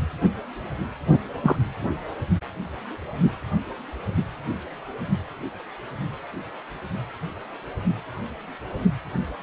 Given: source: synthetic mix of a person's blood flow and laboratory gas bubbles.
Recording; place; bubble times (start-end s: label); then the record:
Doppler ultrasound of blood flow; precordium
1.10-1.18 s: bubbles
1.43-1.56 s: bubbles
From the record:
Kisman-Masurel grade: 112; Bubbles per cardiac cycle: 1 to 2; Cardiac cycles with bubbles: 1 to 10%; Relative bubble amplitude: moderate (0.250 to 0.450); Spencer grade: 1 (occasional bubble signal discernible with the cardiac motion signal, with majority of cardiac periods free of bubbles); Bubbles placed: anywhere in the cardiac cycle